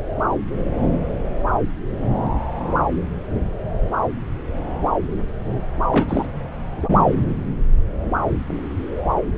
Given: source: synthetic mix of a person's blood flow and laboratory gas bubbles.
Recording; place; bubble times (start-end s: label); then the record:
Doppler ultrasound of blood flow; subclavian vein
5.90-6.27 s: bubbles
From the record:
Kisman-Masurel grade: 212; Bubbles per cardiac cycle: several, 3 to 8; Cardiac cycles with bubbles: 1 to 10%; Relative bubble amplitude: moderate (0.250 to 0.450); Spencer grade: 1 (occasional bubble signal discernible with the cardiac motion signal, with majority of cardiac periods free of bubbles); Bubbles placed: anywhere in the cardiac cycle